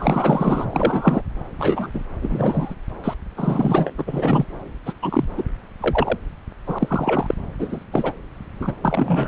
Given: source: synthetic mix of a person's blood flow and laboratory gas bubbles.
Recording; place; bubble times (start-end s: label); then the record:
Doppler ultrasound of blood flow; subclavian vein
0.00-0.67 s: bubbles
0.70-1.22 s: bubbles
1.58-1.90 s: bubbles
1.94-2.02 s: bubbles
2.22-2.75 s: bubbles
3.04-3.14 s: bubbles
3.37-3.90 s: bubbles
3.98-4.45 s: bubbles
4.86-4.93 s: bubbles
5.02-5.24 s: bubbles
5.37-5.43 s: bubbles
5.80-6.18 s: bubbles
6.66-7.35 s: bubbles
7.59-7.85 s: bubbles
7.91-8.12 s: bubbles
8.59-8.73 s: bubbles
8.82-9.28 s: bubbles
From the record:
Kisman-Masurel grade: 243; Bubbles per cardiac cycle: several, 3 to 8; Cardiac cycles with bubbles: 100%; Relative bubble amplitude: loud (0.450 to 0.775); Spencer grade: 3 (all of the cardiac periods contain showers or single bubble signals, but not dominating or overriding the cardiac motion signals); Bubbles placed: anywhere in the cardiac cycle